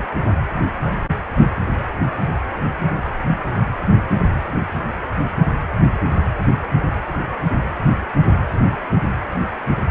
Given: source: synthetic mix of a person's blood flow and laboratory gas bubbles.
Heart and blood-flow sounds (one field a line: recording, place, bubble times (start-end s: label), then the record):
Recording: Doppler ultrasound of blood flow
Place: precordium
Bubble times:
0.82-0.93 s: bubbles
1.60-1.78 s: bubbles
From the record:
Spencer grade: 1 (occasional bubble signal discernible with the cardiac motion signal, with majority of cardiac periods free of bubbles)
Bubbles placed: anywhere in the cardiac cycle